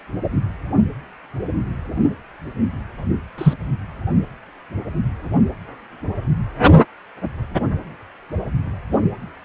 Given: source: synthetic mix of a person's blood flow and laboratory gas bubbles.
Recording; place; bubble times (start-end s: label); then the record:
Doppler ultrasound of blood flow; precordium
3.38-3.53 s: bubbles
From the record:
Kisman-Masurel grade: 113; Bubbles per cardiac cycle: 1 to 2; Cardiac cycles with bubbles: 1 to 10%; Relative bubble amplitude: loud (0.450 to 0.775); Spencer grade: 1 (occasional bubble signal discernible with the cardiac motion signal, with majority of cardiac periods free of bubbles); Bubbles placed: only in the low amplitude regions of the cardiac cycle